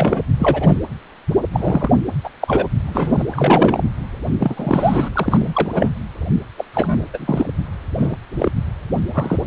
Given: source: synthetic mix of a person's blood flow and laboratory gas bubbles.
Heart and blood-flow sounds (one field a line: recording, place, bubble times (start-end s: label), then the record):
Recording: Doppler ultrasound of blood flow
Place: precordium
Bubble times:
0.00-0.25 s: bubbles
0.39-0.78 s: bubbles
1.52-1.90 s: bubbles
2.23-2.29 s: bubbles
2.41-2.69 s: bubbles
2.86-3.23 s: bubbles
3.31-3.83 s: bubbles
4.39-5.08 s: bubbles
5.14-5.89 s: bubbles
6.58-6.65 s: bubbles
6.74-7.08 s: bubbles
7.13-7.49 s: bubbles
7.97-8.17 s: bubbles
8.39-8.52 s: bubbles
9.13-9.37 s: bubbles
From the record:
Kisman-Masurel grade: 233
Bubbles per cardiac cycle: several, 3 to 8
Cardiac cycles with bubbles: 50 to 99%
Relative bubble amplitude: loud (0.450 to 0.775)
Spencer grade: 3 (all of the cardiac periods contain showers or single bubble signals, but not dominating or overriding the cardiac motion signals)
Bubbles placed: anywhere in the cardiac cycle